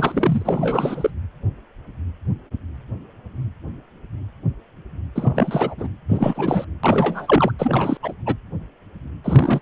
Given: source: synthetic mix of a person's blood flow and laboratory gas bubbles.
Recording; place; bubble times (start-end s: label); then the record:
Doppler ultrasound of blood flow; precordium
0.00-1.10 s: bubbles
5.15-5.75 s: bubbles
5.78-5.88 s: bubbles
6.09-6.65 s: bubbles
6.83-7.52 s: bubbles
7.58-7.98 s: bubbles
8.02-8.13 s: bubbles
8.25-8.35 s: bubbles
9.24-9.60 s: bubbles
From the record:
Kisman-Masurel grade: 332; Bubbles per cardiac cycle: rolling drumbeat, 9 or more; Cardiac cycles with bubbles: 50 to 99%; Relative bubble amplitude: moderate (0.250 to 0.450); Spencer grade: 3 (all of the cardiac periods contain showers or single bubble signals, but not dominating or overriding the cardiac motion signals); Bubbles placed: anywhere in the cardiac cycle